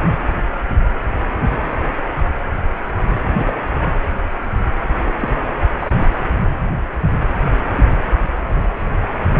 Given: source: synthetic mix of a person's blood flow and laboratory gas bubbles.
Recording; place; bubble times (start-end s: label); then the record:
Doppler ultrasound of blood flow; precordium
1.51-1.56 s: bubbles
3.38-3.53 s: bubbles
5.05-5.13 s: bubbles
5.20-5.33 s: bubbles
5.79-5.91 s: bubbles
5.98-6.09 s: bubbles
8.49-8.89 s: bubbles
From the record:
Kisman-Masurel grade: 121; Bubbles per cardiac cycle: 1 to 2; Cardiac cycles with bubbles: 10 to 50%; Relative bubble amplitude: barely perceptible (0.100 to 0.250); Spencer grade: 2 (many but less than half of the cardiac periods contain bubble signals, singularly or in groups); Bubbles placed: anywhere in the cardiac cycle